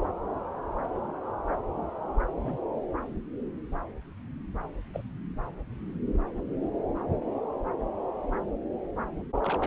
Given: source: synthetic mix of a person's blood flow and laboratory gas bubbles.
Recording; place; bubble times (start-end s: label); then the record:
Doppler ultrasound of blood flow; subclavian vein
2.44-2.59 s: bubbles
4.93-5.01 s: bubbles
6.63-6.67 s: bubbles
9.43-9.67 s: bubbles
From the record:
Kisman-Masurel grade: 121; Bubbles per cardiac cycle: 1 to 2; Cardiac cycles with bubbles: 10 to 50%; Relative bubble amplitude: barely perceptible (0.100 to 0.250); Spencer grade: 2 (many but less than half of the cardiac periods contain bubble signals, singularly or in groups); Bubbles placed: anywhere in the cardiac cycle